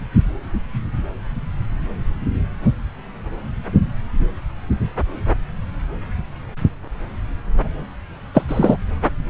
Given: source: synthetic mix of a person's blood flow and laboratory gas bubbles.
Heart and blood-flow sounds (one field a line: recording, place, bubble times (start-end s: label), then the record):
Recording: Doppler ultrasound of blood flow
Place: subclavian vein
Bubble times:
8.34-8.46 s: bubbles
8.48-8.77 s: bubbles
From the record:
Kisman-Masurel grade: 213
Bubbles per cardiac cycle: several, 3 to 8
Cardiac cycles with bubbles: 1 to 10%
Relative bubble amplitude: loud (0.450 to 0.775)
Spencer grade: 1 (occasional bubble signal discernible with the cardiac motion signal, with majority of cardiac periods free of bubbles)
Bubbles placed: anywhere in the cardiac cycle